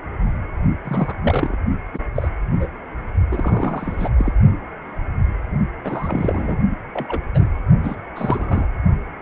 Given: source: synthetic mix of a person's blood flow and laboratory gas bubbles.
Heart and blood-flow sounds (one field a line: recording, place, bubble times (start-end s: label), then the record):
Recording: Doppler ultrasound of blood flow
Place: precordium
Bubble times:
0.84-1.16 s: bubbles
1.24-1.57 s: bubbles
1.94-1.98 s: bubbles
2.15-2.28 s: bubbles
2.58-2.67 s: bubbles
3.32-4.09 s: bubbles
4.18-4.33 s: bubbles
5.84-6.58 s: bubbles
6.93-7.21 s: bubbles
7.33-7.49 s: bubbles
7.83-7.96 s: bubbles
8.15-8.66 s: bubbles
From the record:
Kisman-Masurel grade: 232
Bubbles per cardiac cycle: several, 3 to 8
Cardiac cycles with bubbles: 50 to 99%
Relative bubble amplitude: moderate (0.250 to 0.450)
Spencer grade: 3 (all of the cardiac periods contain showers or single bubble signals, but not dominating or overriding the cardiac motion signals)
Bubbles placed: only in the low amplitude regions of the cardiac cycle